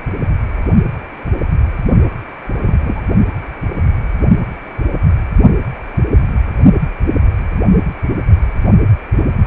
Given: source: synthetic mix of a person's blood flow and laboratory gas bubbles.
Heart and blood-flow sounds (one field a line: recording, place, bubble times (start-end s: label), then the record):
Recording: Doppler ultrasound of blood flow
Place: precordium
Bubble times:
2.63-3.01 s: bubbles
From the record:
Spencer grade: 1 (occasional bubble signal discernible with the cardiac motion signal, with majority of cardiac periods free of bubbles)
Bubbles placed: only in the low amplitude regions of the cardiac cycle